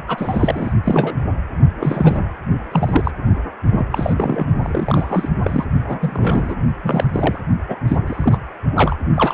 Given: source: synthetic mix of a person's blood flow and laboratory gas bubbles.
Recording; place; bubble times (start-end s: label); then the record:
Doppler ultrasound of blood flow; precordium
0.07-0.73 s: bubbles
0.83-1.17 s: bubbles
1.80-2.22 s: bubbles
2.71-3.11 s: bubbles
3.71-3.85 s: bubbles
3.92-4.45 s: bubbles
4.62-5.29 s: bubbles
5.43-5.65 s: bubbles
5.88-6.55 s: bubbles
6.83-7.38 s: bubbles
7.68-7.76 s: bubbles
7.87-7.96 s: bubbles
8.07-8.38 s: bubbles
8.76-8.96 s: bubbles
9.15-9.34 s: bubbles
From the record:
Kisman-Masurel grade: 243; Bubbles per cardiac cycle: several, 3 to 8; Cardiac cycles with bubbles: 100%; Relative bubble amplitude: loud (0.450 to 0.775); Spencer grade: 3 (all of the cardiac periods contain showers or single bubble signals, but not dominating or overriding the cardiac motion signals); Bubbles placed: only in the low amplitude regions of the cardiac cycle